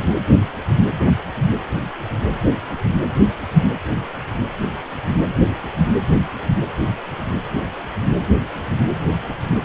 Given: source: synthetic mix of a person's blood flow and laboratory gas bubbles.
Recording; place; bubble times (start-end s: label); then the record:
Doppler ultrasound of blood flow; precordium
no bubbles
From the record:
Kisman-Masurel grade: 000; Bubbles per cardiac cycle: 0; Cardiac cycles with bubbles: 0%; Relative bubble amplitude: no bubbles discernible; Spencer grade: 0 (complete lack of bubble signals)